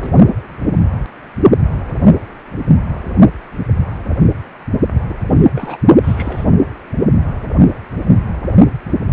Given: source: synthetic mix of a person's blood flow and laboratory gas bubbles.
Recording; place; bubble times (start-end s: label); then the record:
Doppler ultrasound of blood flow; precordium
0.00-0.11 s: bubbles
5.07-5.15 s: bubbles
5.54-5.77 s: bubbles
6.02-6.46 s: bubbles
From the record:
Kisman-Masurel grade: 221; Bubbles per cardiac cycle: several, 3 to 8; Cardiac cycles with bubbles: 10 to 50%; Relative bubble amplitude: barely perceptible (0.100 to 0.250); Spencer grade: 2 (many but less than half of the cardiac periods contain bubble signals, singularly or in groups); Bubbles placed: only in the low amplitude regions of the cardiac cycle